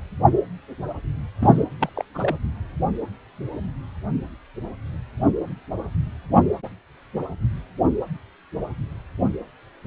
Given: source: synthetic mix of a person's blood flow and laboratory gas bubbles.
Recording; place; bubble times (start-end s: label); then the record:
Doppler ultrasound of blood flow; precordium
1.41-1.67 s: bubbles
1.80-1.90 s: bubbles
1.96-2.04 s: bubbles
2.14-2.36 s: bubbles
From the record:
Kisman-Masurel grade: 221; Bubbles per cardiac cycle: several, 3 to 8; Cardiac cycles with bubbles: 10 to 50%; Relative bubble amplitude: barely perceptible (0.100 to 0.250); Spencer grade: 2 (many but less than half of the cardiac periods contain bubble signals, singularly or in groups); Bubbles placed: anywhere in the cardiac cycle